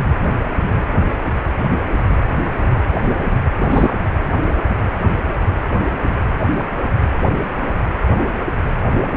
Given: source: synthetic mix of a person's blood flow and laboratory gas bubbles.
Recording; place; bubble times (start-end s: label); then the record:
Doppler ultrasound of blood flow; precordium
3.62-3.94 s: bubbles
From the record:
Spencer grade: 1 (occasional bubble signal discernible with the cardiac motion signal, with majority of cardiac periods free of bubbles); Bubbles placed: anywhere in the cardiac cycle